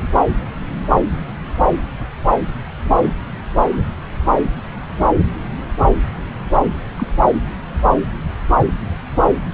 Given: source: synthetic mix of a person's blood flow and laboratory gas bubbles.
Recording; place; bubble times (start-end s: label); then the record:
Doppler ultrasound of blood flow; subclavian vein
6.96-7.07 s: bubbles
From the record:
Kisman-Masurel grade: 112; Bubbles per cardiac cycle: 1 to 2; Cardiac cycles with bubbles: 1 to 10%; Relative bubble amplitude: moderate (0.250 to 0.450); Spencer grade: 1 (occasional bubble signal discernible with the cardiac motion signal, with majority of cardiac periods free of bubbles); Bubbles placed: anywhere in the cardiac cycle